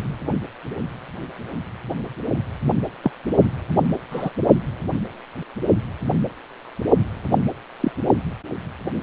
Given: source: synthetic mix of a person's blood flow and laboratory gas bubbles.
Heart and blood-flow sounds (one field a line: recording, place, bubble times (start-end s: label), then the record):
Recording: Doppler ultrasound of blood flow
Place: precordium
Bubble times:
3.02-3.11 s: bubbles
4.11-4.31 s: bubbles
7.80-7.92 s: bubbles
From the record:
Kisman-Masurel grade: 122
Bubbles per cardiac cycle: 1 to 2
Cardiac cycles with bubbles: 10 to 50%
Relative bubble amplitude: moderate (0.250 to 0.450)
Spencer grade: 2 (many but less than half of the cardiac periods contain bubble signals, singularly or in groups)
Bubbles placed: only in the low amplitude regions of the cardiac cycle